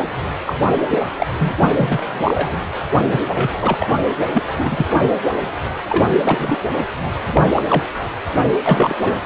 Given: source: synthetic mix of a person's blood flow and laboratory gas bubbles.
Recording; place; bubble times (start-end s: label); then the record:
Doppler ultrasound of blood flow; precordium
0.46-0.53 s: bubbles
0.91-0.99 s: bubbles
1.18-1.27 s: bubbles
1.39-1.55 s: bubbles
1.77-2.60 s: bubbles
3.06-3.21 s: bubbles
3.34-3.50 s: bubbles
3.61-3.90 s: bubbles
4.34-4.43 s: bubbles
4.59-4.88 s: bubbles
5.03-5.10 s: bubbles
5.88-6.04 s: bubbles
6.23-6.56 s: bubbles
7.35-7.45 s: bubbles
7.56-7.62 s: bubbles
7.69-7.83 s: bubbles
8.66-8.95 s: bubbles
9.00-9.16 s: bubbles
From the record:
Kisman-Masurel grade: 242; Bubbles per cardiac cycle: several, 3 to 8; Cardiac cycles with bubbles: 100%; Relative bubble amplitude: moderate (0.250 to 0.450); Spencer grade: 3 (all of the cardiac periods contain showers or single bubble signals, but not dominating or overriding the cardiac motion signals); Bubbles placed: anywhere in the cardiac cycle